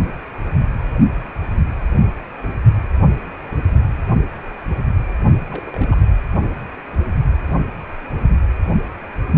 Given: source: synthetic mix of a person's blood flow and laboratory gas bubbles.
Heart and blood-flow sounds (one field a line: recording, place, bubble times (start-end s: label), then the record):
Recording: Doppler ultrasound of blood flow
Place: precordium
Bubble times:
5.34-5.70 s: bubbles
5.73-5.88 s: bubbles
5.91-5.95 s: bubbles
From the record:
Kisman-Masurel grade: 221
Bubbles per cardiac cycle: several, 3 to 8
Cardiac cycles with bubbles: 10 to 50%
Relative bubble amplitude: barely perceptible (0.100 to 0.250)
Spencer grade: 2 (many but less than half of the cardiac periods contain bubble signals, singularly or in groups)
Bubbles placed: anywhere in the cardiac cycle